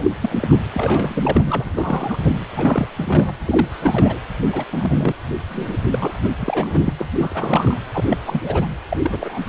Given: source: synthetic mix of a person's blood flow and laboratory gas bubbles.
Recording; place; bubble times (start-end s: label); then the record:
Doppler ultrasound of blood flow; precordium
0.00-0.11 s: bubbles
0.22-0.57 s: bubbles
0.72-2.44 s: bubbles
2.50-2.88 s: bubbles
2.97-3.35 s: bubbles
3.46-3.68 s: bubbles
3.71-4.19 s: bubbles
4.52-4.65 s: bubbles
4.72-5.14 s: bubbles
5.48-5.77 s: bubbles
5.92-6.30 s: bubbles
6.39-6.93 s: bubbles
6.98-7.05 s: bubbles
7.19-7.79 s: bubbles
7.94-8.17 s: bubbles
8.25-8.67 s: bubbles
8.90-8.97 s: bubbles
9.01-9.38 s: bubbles
9.44-9.49 s: bubbles
From the record:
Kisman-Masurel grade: 342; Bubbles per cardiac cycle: rolling drumbeat, 9 or more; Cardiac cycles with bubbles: 100%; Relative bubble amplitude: moderate (0.250 to 0.450); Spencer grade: 3 (all of the cardiac periods contain showers or single bubble signals, but not dominating or overriding the cardiac motion signals); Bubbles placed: anywhere in the cardiac cycle